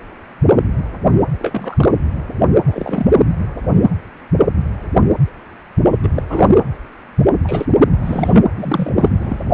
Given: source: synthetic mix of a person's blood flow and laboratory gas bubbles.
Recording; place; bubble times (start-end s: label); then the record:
Doppler ultrasound of blood flow; precordium
1.38-1.93 s: bubbles
2.64-3.06 s: bubbles
6.02-6.09 s: bubbles
6.14-6.22 s: bubbles
6.29-6.48 s: bubbles
7.43-7.66 s: bubbles
8.01-8.44 s: bubbles
8.56-8.93 s: bubbles
8.97-9.08 s: bubbles
9.19-9.54 s: bubbles
From the record:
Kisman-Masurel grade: 233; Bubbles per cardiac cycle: several, 3 to 8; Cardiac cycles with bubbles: 50 to 99%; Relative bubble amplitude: loud (0.450 to 0.775); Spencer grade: 3 (all of the cardiac periods contain showers or single bubble signals, but not dominating or overriding the cardiac motion signals); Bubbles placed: anywhere in the cardiac cycle